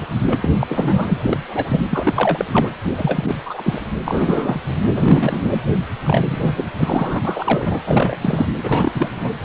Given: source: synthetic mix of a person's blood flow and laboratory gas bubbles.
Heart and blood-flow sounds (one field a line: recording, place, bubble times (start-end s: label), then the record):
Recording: Doppler ultrasound of blood flow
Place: precordium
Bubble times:
0.26-0.42 s: bubbles
0.44-0.49 s: bubbles
0.59-1.18 s: bubbles
1.23-1.38 s: bubbles
1.48-1.81 s: bubbles
1.90-2.45 s: bubbles
2.52-2.69 s: bubbles
2.96-3.35 s: bubbles
3.46-3.80 s: bubbles
4.05-4.71 s: bubbles
4.83-4.93 s: bubbles
4.95-5.59 s: bubbles
6.05-6.65 s: bubbles
6.77-7.21 s: bubbles
7.24-7.79 s: bubbles
7.86-8.47 s: bubbles
8.63-9.09 s: bubbles
9.21-9.30 s: bubbles
9.40-9.44 s: bubbles
From the record:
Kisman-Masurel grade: 342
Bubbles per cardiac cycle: rolling drumbeat, 9 or more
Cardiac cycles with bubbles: 100%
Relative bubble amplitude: moderate (0.250 to 0.450)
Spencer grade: 3 (all of the cardiac periods contain showers or single bubble signals, but not dominating or overriding the cardiac motion signals)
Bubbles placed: anywhere in the cardiac cycle